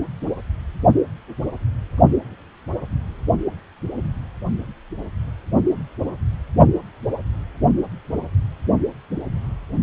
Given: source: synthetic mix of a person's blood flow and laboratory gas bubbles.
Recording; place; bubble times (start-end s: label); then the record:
Doppler ultrasound of blood flow; precordium
no bubbles
From the record:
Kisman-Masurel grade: 000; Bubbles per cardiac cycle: 0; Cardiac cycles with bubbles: 0%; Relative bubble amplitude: no bubbles discernible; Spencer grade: 0 (complete lack of bubble signals)